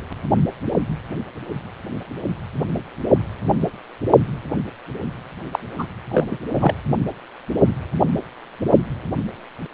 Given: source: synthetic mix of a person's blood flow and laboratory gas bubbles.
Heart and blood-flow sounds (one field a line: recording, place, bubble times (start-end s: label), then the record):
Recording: Doppler ultrasound of blood flow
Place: precordium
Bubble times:
5.51-5.59 s: bubbles
5.78-5.86 s: bubbles
6.10-6.25 s: bubbles
6.30-6.38 s: bubbles
6.53-6.75 s: bubbles
From the record:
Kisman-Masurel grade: 212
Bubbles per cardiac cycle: several, 3 to 8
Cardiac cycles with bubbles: 1 to 10%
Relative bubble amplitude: moderate (0.250 to 0.450)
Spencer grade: 1 (occasional bubble signal discernible with the cardiac motion signal, with majority of cardiac periods free of bubbles)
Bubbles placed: only in the low amplitude regions of the cardiac cycle